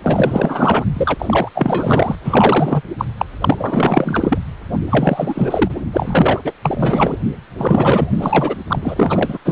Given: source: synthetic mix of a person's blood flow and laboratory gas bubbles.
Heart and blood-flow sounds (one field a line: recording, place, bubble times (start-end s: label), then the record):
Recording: Doppler ultrasound of blood flow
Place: precordium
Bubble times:
0.04-0.85 s: bubbles
0.94-1.15 s: bubbles
1.19-1.49 s: bubbles
1.54-2.15 s: bubbles
2.23-2.82 s: bubbles
2.98-3.05 s: bubbles
3.17-3.25 s: bubbles
3.40-4.38 s: bubbles
4.89-5.71 s: bubbles
5.93-6.39 s: bubbles
6.45-6.52 s: bubbles
6.62-7.17 s: bubbles
7.58-8.56 s: bubbles
8.66-9.38 s: bubbles
9.45-9.52 s: bubbles
From the record:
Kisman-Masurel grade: 444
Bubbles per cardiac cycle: continuous sound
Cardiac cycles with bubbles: 100%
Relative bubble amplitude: maximal (0.775 to 0.999)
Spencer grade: 4 (maximum detectable bubble signal sounding continuously throughout systole and diastole of every cardiac period, and overriding the amplitude of the normal cardiac signals)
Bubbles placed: anywhere in the cardiac cycle